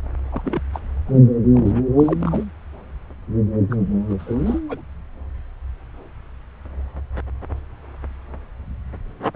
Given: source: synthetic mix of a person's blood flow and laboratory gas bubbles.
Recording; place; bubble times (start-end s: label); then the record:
Doppler ultrasound of blood flow; subclavian vein
0.32-0.60 s: bubbles
0.73-0.79 s: bubbles
1.07-1.18 s: bubbles
1.52-1.81 s: bubbles
1.96-2.44 s: bubbles
3.70-3.76 s: bubbles
4.10-4.15 s: bubbles
4.19-4.60 s: bubbles
4.69-4.82 s: bubbles
From the record:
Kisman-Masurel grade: 222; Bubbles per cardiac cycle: several, 3 to 8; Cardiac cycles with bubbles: 10 to 50%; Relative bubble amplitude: moderate (0.250 to 0.450); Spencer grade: 2 (many but less than half of the cardiac periods contain bubble signals, singularly or in groups); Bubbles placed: anywhere in the cardiac cycle